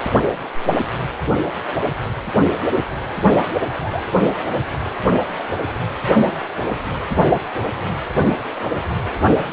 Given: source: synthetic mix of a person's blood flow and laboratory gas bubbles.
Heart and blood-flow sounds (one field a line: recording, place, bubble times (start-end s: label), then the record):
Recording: Doppler ultrasound of blood flow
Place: precordium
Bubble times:
3.70-4.02 s: bubbles
4.21-4.41 s: bubbles
From the record:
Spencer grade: 1 (occasional bubble signal discernible with the cardiac motion signal, with majority of cardiac periods free of bubbles)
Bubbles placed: anywhere in the cardiac cycle